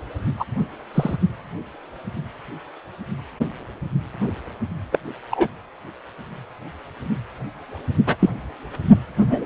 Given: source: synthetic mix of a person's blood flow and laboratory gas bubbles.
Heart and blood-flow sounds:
Doppler ultrasound of blood flow; precordium
0.37-0.45 s: bubbles
0.95-1.16 s: bubbles
4.92-4.99 s: bubbles
5.31-5.48 s: bubbles
8.06-8.16 s: bubbles
8.19-8.29 s: bubbles
9.15-9.46 s: bubbles
From the record:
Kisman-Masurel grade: 123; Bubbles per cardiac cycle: 1 to 2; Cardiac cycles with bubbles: 10 to 50%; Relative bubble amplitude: loud (0.450 to 0.775); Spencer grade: 2 (many but less than half of the cardiac periods contain bubble signals, singularly or in groups); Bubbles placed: only in the low amplitude regions of the cardiac cycle

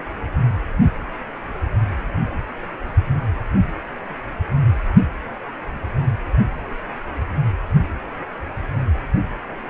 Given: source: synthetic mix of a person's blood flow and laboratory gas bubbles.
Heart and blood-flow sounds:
Doppler ultrasound of blood flow; precordium
no bubbles
From the record:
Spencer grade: 0 (complete lack of bubble signals)

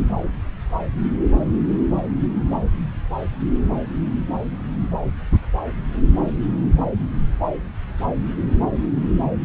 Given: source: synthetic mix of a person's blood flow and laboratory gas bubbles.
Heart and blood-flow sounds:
Doppler ultrasound of blood flow; subclavian vein
7.60-7.69 s: bubbles
From the record:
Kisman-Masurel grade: 111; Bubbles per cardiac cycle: 1 to 2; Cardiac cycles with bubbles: 1 to 10%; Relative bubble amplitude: barely perceptible (0.100 to 0.250); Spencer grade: 1 (occasional bubble signal discernible with the cardiac motion signal, with majority of cardiac periods free of bubbles); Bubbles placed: anywhere in the cardiac cycle

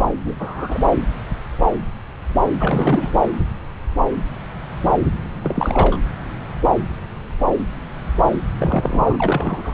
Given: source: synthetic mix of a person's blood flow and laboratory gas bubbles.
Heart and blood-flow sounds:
Doppler ultrasound of blood flow; subclavian vein
0.24-0.37 s: bubbles
0.39-0.97 s: bubbles
2.58-3.12 s: bubbles
5.43-5.99 s: bubbles
8.58-9.17 s: bubbles
9.20-9.74 s: bubbles
From the record:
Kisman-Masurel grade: 222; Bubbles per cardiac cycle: several, 3 to 8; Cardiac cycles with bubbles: 10 to 50%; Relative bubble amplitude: moderate (0.250 to 0.450); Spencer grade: 2 (many but less than half of the cardiac periods contain bubble signals, singularly or in groups); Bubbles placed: anywhere in the cardiac cycle

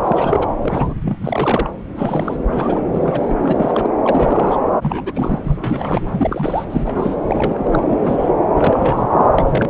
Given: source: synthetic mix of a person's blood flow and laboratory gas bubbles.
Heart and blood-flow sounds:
Doppler ultrasound of blood flow; subclavian vein
0.04-0.48 s: bubbles
0.62-0.94 s: bubbles
1.05-1.19 s: bubbles
1.21-1.70 s: bubbles
1.96-2.36 s: bubbles
2.51-2.84 s: bubbles
2.93-3.36 s: bubbles
3.42-3.88 s: bubbles
4.04-4.57 s: bubbles
4.75-5.40 s: bubbles
5.45-6.10 s: bubbles
6.12-6.65 s: bubbles
6.70-7.16 s: bubbles
7.27-7.84 s: bubbles
7.89-8.34 s: bubbles
8.56-9.26 s: bubbles
9.38-9.70 s: bubbles
From the record:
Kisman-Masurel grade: 342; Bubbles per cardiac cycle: rolling drumbeat, 9 or more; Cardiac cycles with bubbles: 100%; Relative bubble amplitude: moderate (0.250 to 0.450); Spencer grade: 3 (all of the cardiac periods contain showers or single bubble signals, but not dominating or overriding the cardiac motion signals); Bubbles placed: anywhere in the cardiac cycle

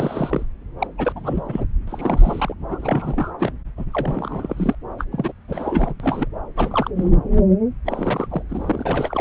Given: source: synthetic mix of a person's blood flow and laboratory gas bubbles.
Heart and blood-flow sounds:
Doppler ultrasound of blood flow; subclavian vein
0.00-0.46 s: bubbles
0.79-0.87 s: bubbles
0.98-1.12 s: bubbles
1.15-1.67 s: bubbles
1.88-2.54 s: bubbles
2.69-3.32 s: bubbles
3.39-3.52 s: bubbles
3.77-3.85 s: bubbles
3.90-4.75 s: bubbles
4.98-5.05 s: bubbles
5.11-5.32 s: bubbles
5.48-5.94 s: bubbles
5.99-6.27 s: bubbles
6.56-6.90 s: bubbles
6.96-7.10 s: bubbles
7.85-8.43 s: bubbles
8.50-9.21 s: bubbles
From the record:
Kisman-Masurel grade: 342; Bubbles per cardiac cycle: rolling drumbeat, 9 or more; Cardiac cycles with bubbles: 100%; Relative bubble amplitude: moderate (0.250 to 0.450); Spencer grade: 3 (all of the cardiac periods contain showers or single bubble signals, but not dominating or overriding the cardiac motion signals); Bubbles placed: anywhere in the cardiac cycle

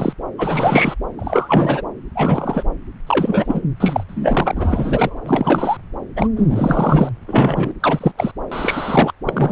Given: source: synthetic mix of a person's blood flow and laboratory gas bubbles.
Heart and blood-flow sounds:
Doppler ultrasound of blood flow; subclavian vein
0.00-0.13 s: bubbles
0.38-0.94 s: bubbles
1.19-1.82 s: bubbles
2.15-2.63 s: bubbles
3.06-3.61 s: bubbles
3.80-4.04 s: bubbles
4.08-5.16 s: bubbles
5.26-5.77 s: bubbles
6.16-6.28 s: bubbles
6.36-7.13 s: bubbles
7.28-7.71 s: bubbles
7.80-8.12 s: bubbles
8.17-8.32 s: bubbles
8.52-9.12 s: bubbles
9.26-9.52 s: bubbles
From the record:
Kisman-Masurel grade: 343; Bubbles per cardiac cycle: rolling drumbeat, 9 or more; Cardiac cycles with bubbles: 100%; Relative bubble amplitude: loud (0.450 to 0.775); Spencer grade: 3 (all of the cardiac periods contain showers or single bubble signals, but not dominating or overriding the cardiac motion signals); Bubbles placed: anywhere in the cardiac cycle

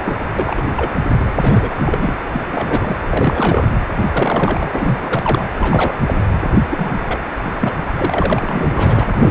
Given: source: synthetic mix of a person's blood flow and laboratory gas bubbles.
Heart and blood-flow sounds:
Doppler ultrasound of blood flow; precordium
0.04-0.17 s: bubbles
0.39-0.63 s: bubbles
0.76-0.91 s: bubbles
1.19-1.33 s: bubbles
1.36-1.74 s: bubbles
1.78-2.14 s: bubbles
2.33-2.46 s: bubbles
2.53-2.98 s: bubbles
3.03-3.67 s: bubbles
3.97-5.50 s: bubbles
5.57-5.96 s: bubbles
6.06-6.14 s: bubbles
6.70-6.92 s: bubbles
7.01-7.19 s: bubbles
7.42-7.52 s: bubbles
7.60-7.79 s: bubbles
7.96-9.04 s: bubbles
9.10-9.31 s: bubbles
From the record:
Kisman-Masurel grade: 342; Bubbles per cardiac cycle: rolling drumbeat, 9 or more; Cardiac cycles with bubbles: 100%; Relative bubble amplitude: moderate (0.250 to 0.450); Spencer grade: 3 (all of the cardiac periods contain showers or single bubble signals, but not dominating or overriding the cardiac motion signals); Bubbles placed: anywhere in the cardiac cycle

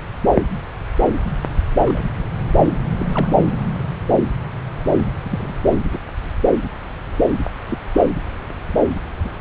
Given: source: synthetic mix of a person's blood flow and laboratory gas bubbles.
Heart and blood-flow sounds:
Doppler ultrasound of blood flow; subclavian vein
1.84-2.10 s: bubbles
2.55-2.68 s: bubbles
2.99-3.07 s: bubbles
3.12-3.27 s: bubbles
5.23-5.56 s: bubbles
5.83-6.00 s: bubbles
7.69-7.78 s: bubbles
9.21-9.30 s: bubbles
From the record:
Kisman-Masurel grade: 122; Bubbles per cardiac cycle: 1 to 2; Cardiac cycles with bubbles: 10 to 50%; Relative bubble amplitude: moderate (0.250 to 0.450); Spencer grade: 2 (many but less than half of the cardiac periods contain bubble signals, singularly or in groups); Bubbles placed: anywhere in the cardiac cycle

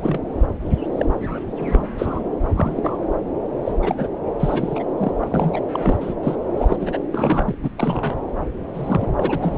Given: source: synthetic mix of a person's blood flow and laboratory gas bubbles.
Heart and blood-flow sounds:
Doppler ultrasound of blood flow; subclavian vein
0.00-0.20 s: bubbles
0.98-1.06 s: bubbles
1.21-1.41 s: bubbles
1.59-1.88 s: bubbles
1.98-2.20 s: bubbles
2.55-2.97 s: bubbles
3.65-3.73 s: bubbles
3.81-4.08 s: bubbles
4.40-4.83 s: bubbles
4.98-5.12 s: bubbles
5.17-5.28 s: bubbles
5.30-5.60 s: bubbles
5.71-5.98 s: bubbles
6.00-6.14 s: bubbles
6.23-6.36 s: bubbles
6.57-6.77 s: bubbles
6.79-6.98 s: bubbles
7.12-7.58 s: bubbles
7.62-7.70 s: bubbles
7.77-8.16 s: bubbles
8.73-9.08 s: bubbles
9.18-9.39 s: bubbles
9.42-9.58 s: bubbles
From the record:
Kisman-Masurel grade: 242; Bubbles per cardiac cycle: several, 3 to 8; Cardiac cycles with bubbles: 100%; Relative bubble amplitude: moderate (0.250 to 0.450); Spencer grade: 3 (all of the cardiac periods contain showers or single bubble signals, but not dominating or overriding the cardiac motion signals); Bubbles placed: anywhere in the cardiac cycle

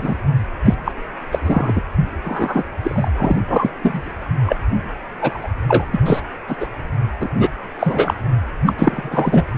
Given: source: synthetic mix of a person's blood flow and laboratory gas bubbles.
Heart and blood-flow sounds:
Doppler ultrasound of blood flow; precordium
0.00-0.16 s: bubbles
0.65-0.74 s: bubbles
0.84-0.92 s: bubbles
1.31-1.38 s: bubbles
1.44-1.82 s: bubbles
2.25-2.63 s: bubbles
2.82-3.10 s: bubbles
3.17-3.42 s: bubbles
3.48-3.70 s: bubbles
3.82-4.14 s: bubbles
4.46-4.56 s: bubbles
5.21-5.47 s: bubbles
5.68-5.85 s: bubbles
5.93-6.00 s: bubbles
6.05-6.21 s: bubbles
6.47-6.56 s: bubbles
6.60-6.67 s: bubbles
7.20-7.29 s: bubbles
7.38-7.50 s: bubbles
7.79-8.14 s: bubbles
8.66-8.74 s: bubbles
8.78-9.44 s: bubbles
From the record:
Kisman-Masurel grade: 243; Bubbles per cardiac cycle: several, 3 to 8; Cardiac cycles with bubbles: 100%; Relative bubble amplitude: loud (0.450 to 0.775); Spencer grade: 3 (all of the cardiac periods contain showers or single bubble signals, but not dominating or overriding the cardiac motion signals); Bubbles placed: anywhere in the cardiac cycle

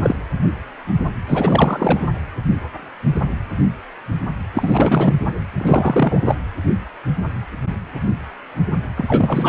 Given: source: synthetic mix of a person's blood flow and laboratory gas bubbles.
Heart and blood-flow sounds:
Doppler ultrasound of blood flow; precordium
0.03-0.15 s: bubbles
1.27-2.08 s: bubbles
4.54-5.15 s: bubbles
5.58-6.38 s: bubbles
8.96-9.49 s: bubbles
From the record:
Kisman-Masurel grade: 333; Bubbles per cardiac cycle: rolling drumbeat, 9 or more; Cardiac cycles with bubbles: 50 to 99%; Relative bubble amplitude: loud (0.450 to 0.775); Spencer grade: 3 (all of the cardiac periods contain showers or single bubble signals, but not dominating or overriding the cardiac motion signals); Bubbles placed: anywhere in the cardiac cycle

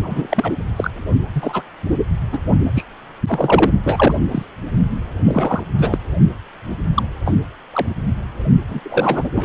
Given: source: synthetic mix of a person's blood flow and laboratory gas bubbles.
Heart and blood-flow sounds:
Doppler ultrasound of blood flow; precordium
0.03-0.52 s: bubbles
0.76-0.90 s: bubbles
1.34-1.62 s: bubbles
2.32-2.39 s: bubbles
2.75-2.85 s: bubbles
3.28-3.71 s: bubbles
3.84-4.18 s: bubbles
4.31-4.46 s: bubbles
5.25-5.63 s: bubbles
5.78-5.98 s: bubbles
6.95-7.03 s: bubbles
7.25-7.34 s: bubbles
7.73-7.87 s: bubbles
8.68-8.80 s: bubbles
8.84-9.29 s: bubbles
9.35-9.45 s: bubbles
From the record:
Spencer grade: 3 (all of the cardiac periods contain showers or single bubble signals, but not dominating or overriding the cardiac motion signals); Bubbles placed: only in the low amplitude regions of the cardiac cycle

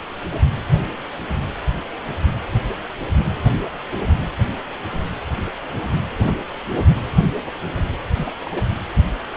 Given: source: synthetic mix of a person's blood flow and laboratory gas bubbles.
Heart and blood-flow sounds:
Doppler ultrasound of blood flow; precordium
8.15-8.33 s: bubbles
8.46-8.65 s: bubbles
From the record:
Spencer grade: 1 (occasional bubble signal discernible with the cardiac motion signal, with majority of cardiac periods free of bubbles); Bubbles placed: anywhere in the cardiac cycle

